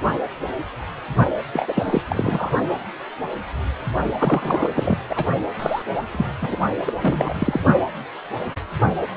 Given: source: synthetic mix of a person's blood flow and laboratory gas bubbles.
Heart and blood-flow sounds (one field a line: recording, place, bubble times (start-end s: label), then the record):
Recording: Doppler ultrasound of blood flow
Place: precordium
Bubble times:
1.52-2.02 s: bubbles
2.09-2.52 s: bubbles
4.18-4.96 s: bubbles
5.09-5.25 s: bubbles
5.59-5.82 s: bubbles
6.12-6.25 s: bubbles
6.41-6.56 s: bubbles
6.86-6.93 s: bubbles
7.03-7.61 s: bubbles
From the record:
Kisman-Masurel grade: 333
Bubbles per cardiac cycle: rolling drumbeat, 9 or more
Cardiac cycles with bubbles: 50 to 99%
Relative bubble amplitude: loud (0.450 to 0.775)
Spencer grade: 3 (all of the cardiac periods contain showers or single bubble signals, but not dominating or overriding the cardiac motion signals)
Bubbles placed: only in the low amplitude regions of the cardiac cycle